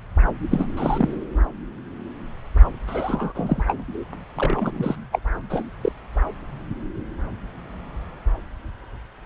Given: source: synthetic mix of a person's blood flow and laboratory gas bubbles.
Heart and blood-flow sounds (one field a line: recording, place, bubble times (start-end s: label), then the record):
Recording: Doppler ultrasound of blood flow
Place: subclavian vein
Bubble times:
0.50-0.65 s: bubbles
0.77-1.25 s: bubbles
2.87-3.63 s: bubbles
3.67-3.75 s: bubbles
4.36-4.96 s: bubbles
5.11-5.19 s: bubbles
5.50-5.64 s: bubbles
5.82-5.92 s: bubbles
From the record:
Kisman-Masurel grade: 222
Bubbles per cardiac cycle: several, 3 to 8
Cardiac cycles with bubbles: 10 to 50%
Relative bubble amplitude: moderate (0.250 to 0.450)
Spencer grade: 2 (many but less than half of the cardiac periods contain bubble signals, singularly or in groups)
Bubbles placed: anywhere in the cardiac cycle